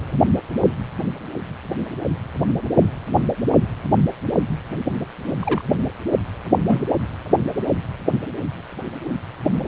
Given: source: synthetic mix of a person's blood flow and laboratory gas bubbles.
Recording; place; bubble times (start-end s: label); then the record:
Doppler ultrasound of blood flow; precordium
5.42-5.63 s: bubbles
6.67-6.87 s: bubbles
From the record:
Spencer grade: 2 (many but less than half of the cardiac periods contain bubble signals, singularly or in groups); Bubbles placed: anywhere in the cardiac cycle